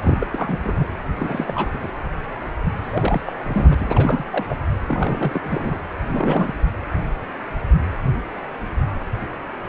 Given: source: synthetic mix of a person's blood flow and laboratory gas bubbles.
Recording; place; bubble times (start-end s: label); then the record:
Doppler ultrasound of blood flow; precordium
0.01-0.27 s: bubbles
0.32-0.60 s: bubbles
0.63-0.76 s: bubbles
0.80-0.84 s: bubbles
1.18-1.79 s: bubbles
1.83-1.92 s: bubbles
2.81-3.21 s: bubbles
3.25-3.33 s: bubbles
3.42-4.26 s: bubbles
4.30-4.45 s: bubbles
4.49-4.57 s: bubbles
4.87-5.41 s: bubbles
5.44-5.78 s: bubbles
6.01-6.54 s: bubbles
From the record:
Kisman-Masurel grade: 332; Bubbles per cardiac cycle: rolling drumbeat, 9 or more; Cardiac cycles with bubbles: 50 to 99%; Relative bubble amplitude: moderate (0.250 to 0.450); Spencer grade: 3 (all of the cardiac periods contain showers or single bubble signals, but not dominating or overriding the cardiac motion signals); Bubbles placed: anywhere in the cardiac cycle